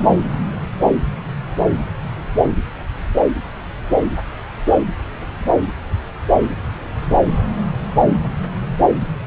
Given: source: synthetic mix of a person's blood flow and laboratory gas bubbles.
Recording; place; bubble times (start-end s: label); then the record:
Doppler ultrasound of blood flow; subclavian vein
no bubbles
From the record:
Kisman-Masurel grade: 000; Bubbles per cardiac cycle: 0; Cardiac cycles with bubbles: 0%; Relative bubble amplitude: no bubbles discernible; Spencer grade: 0 (complete lack of bubble signals)